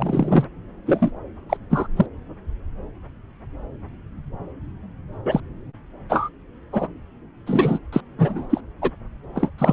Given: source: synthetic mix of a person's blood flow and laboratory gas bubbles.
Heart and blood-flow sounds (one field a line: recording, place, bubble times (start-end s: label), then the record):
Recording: Doppler ultrasound of blood flow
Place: subclavian vein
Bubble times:
0.00-0.44 s: bubbles
0.86-1.11 s: bubbles
1.49-1.57 s: bubbles
1.70-1.88 s: bubbles
1.96-2.06 s: bubbles
5.25-5.40 s: bubbles
6.09-6.29 s: bubbles
6.72-6.88 s: bubbles
7.46-7.79 s: bubbles
7.92-8.00 s: bubbles
8.18-8.61 s: bubbles
8.81-8.90 s: bubbles
9.34-9.50 s: bubbles
9.58-9.73 s: bubbles
From the record:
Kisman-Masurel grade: 233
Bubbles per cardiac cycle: several, 3 to 8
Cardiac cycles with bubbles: 50 to 99%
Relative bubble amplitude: loud (0.450 to 0.775)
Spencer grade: 3 (all of the cardiac periods contain showers or single bubble signals, but not dominating or overriding the cardiac motion signals)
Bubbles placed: anywhere in the cardiac cycle